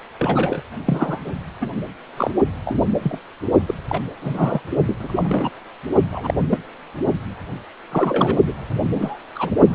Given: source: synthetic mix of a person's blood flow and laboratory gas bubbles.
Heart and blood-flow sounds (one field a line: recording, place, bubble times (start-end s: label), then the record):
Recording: Doppler ultrasound of blood flow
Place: precordium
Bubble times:
0.19-0.62 s: bubbles
0.86-1.39 s: bubbles
1.61-1.68 s: bubbles
2.17-2.31 s: bubbles
2.65-2.81 s: bubbles
3.02-3.19 s: bubbles
3.66-3.75 s: bubbles
3.88-4.00 s: bubbles
4.21-4.62 s: bubbles
4.86-4.96 s: bubbles
4.99-5.50 s: bubbles
6.12-6.34 s: bubbles
6.50-6.58 s: bubbles
7.91-8.38 s: bubbles
8.46-8.54 s: bubbles
8.80-9.18 s: bubbles
9.35-9.51 s: bubbles
From the record:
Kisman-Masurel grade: 242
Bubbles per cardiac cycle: several, 3 to 8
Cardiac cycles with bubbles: 100%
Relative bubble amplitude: moderate (0.250 to 0.450)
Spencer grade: 3 (all of the cardiac periods contain showers or single bubble signals, but not dominating or overriding the cardiac motion signals)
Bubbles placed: only in the low amplitude regions of the cardiac cycle